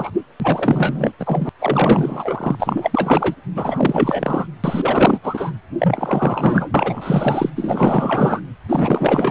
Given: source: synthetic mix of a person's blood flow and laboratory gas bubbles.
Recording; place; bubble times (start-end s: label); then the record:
Doppler ultrasound of blood flow; precordium
0.00-0.10 s: bubbles
0.39-1.11 s: bubbles
1.19-1.49 s: bubbles
1.60-2.56 s: bubbles
2.60-3.35 s: bubbles
3.55-4.46 s: bubbles
4.63-5.20 s: bubbles
5.23-5.52 s: bubbles
5.78-7.50 s: bubbles
7.55-8.42 s: bubbles
8.69-9.31 s: bubbles
From the record:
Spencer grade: 4 (maximum detectable bubble signal sounding continuously throughout systole and diastole of every cardiac period, and overriding the amplitude of the normal cardiac signals); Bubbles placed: anywhere in the cardiac cycle